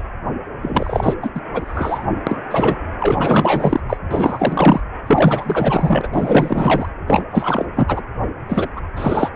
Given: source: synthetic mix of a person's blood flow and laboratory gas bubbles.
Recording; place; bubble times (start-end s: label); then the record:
Doppler ultrasound of blood flow; precordium
0.00-0.02 s: bubbles
0.61-1.14 s: bubbles
1.22-1.31 s: bubbles
1.34-1.41 s: bubbles
1.54-2.06 s: bubbles
2.27-2.43 s: bubbles
2.50-2.77 s: bubbles
3.00-3.80 s: bubbles
3.88-3.97 s: bubbles
4.10-4.80 s: bubbles
5.06-6.08 s: bubbles
6.12-6.89 s: bubbles
7.07-7.24 s: bubbles
7.31-7.65 s: bubbles
7.75-8.03 s: bubbles
8.49-8.70 s: bubbles
8.76-8.80 s: bubbles
8.96-9.29 s: bubbles
From the record:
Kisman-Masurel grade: 444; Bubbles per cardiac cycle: continuous sound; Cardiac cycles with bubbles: 100%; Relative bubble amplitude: maximal (0.775 to 0.999); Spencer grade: 4 (maximum detectable bubble signal sounding continuously throughout systole and diastole of every cardiac period, and overriding the amplitude of the normal cardiac signals); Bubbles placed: anywhere in the cardiac cycle